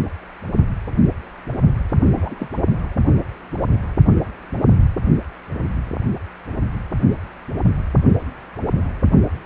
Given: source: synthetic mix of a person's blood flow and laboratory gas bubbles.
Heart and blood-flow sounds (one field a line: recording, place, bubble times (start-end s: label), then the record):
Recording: Doppler ultrasound of blood flow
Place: precordium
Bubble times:
2.15-2.49 s: bubbles
From the record:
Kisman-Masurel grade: 211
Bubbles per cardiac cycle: several, 3 to 8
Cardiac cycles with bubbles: 1 to 10%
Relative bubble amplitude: barely perceptible (0.100 to 0.250)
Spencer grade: 1 (occasional bubble signal discernible with the cardiac motion signal, with majority of cardiac periods free of bubbles)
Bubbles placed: only in the low amplitude regions of the cardiac cycle